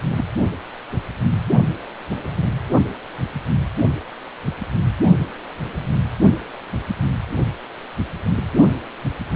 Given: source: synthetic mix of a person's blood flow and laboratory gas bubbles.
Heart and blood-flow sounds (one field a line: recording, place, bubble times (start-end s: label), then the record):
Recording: Doppler ultrasound of blood flow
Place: precordium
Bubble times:
0.00-0.02 s: bubbles
0.17-0.24 s: bubbles
From the record:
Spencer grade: 2 (many but less than half of the cardiac periods contain bubble signals, singularly or in groups)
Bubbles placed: anywhere in the cardiac cycle